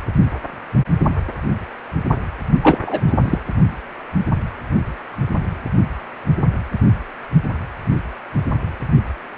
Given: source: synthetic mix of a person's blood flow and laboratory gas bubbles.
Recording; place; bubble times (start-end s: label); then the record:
Doppler ultrasound of blood flow; precordium
2.62-2.78 s: bubbles
2.82-3.00 s: bubbles
3.07-3.13 s: bubbles
3.21-3.39 s: bubbles
From the record:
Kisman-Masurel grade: 212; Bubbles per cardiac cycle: several, 3 to 8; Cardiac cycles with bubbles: 1 to 10%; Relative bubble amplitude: moderate (0.250 to 0.450); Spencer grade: 1 (occasional bubble signal discernible with the cardiac motion signal, with majority of cardiac periods free of bubbles); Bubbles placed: anywhere in the cardiac cycle